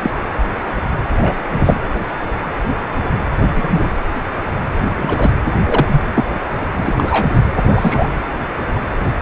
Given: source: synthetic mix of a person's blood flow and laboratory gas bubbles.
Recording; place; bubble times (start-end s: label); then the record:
Doppler ultrasound of blood flow; precordium
0.03-0.10 s: bubbles
1.21-1.34 s: bubbles
1.54-1.80 s: bubbles
3.46-3.89 s: bubbles
4.97-5.39 s: bubbles
5.65-5.87 s: bubbles
5.90-6.01 s: bubbles
6.14-6.25 s: bubbles
6.77-6.93 s: bubbles
6.97-7.28 s: bubbles
7.65-8.08 s: bubbles
From the record:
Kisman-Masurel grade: 233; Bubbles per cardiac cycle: several, 3 to 8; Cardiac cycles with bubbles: 50 to 99%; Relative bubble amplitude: loud (0.450 to 0.775); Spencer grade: 3 (all of the cardiac periods contain showers or single bubble signals, but not dominating or overriding the cardiac motion signals); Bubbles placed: anywhere in the cardiac cycle